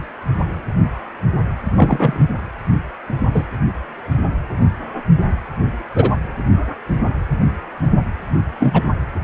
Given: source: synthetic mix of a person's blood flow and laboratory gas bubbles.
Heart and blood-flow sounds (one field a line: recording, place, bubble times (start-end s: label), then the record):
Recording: Doppler ultrasound of blood flow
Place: precordium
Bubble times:
1.76-2.27 s: bubbles
3.34-3.43 s: bubbles
5.95-6.11 s: bubbles
8.60-8.82 s: bubbles
From the record:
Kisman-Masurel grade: 123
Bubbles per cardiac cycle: 1 to 2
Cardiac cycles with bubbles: 10 to 50%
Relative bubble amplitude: loud (0.450 to 0.775)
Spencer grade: 2 (many but less than half of the cardiac periods contain bubble signals, singularly or in groups)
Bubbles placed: anywhere in the cardiac cycle